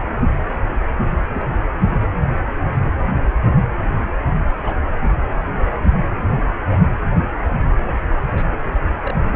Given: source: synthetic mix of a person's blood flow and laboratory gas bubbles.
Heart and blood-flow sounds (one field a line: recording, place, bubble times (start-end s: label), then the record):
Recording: Doppler ultrasound of blood flow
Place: precordium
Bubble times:
1.28-1.42 s: bubbles
4.61-4.76 s: bubbles
6.61-6.67 s: bubbles
8.21-8.45 s: bubbles
9.04-9.13 s: bubbles
From the record:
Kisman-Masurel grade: 121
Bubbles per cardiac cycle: 1 to 2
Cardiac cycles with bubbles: 10 to 50%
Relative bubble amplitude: barely perceptible (0.100 to 0.250)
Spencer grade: 2 (many but less than half of the cardiac periods contain bubble signals, singularly or in groups)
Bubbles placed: anywhere in the cardiac cycle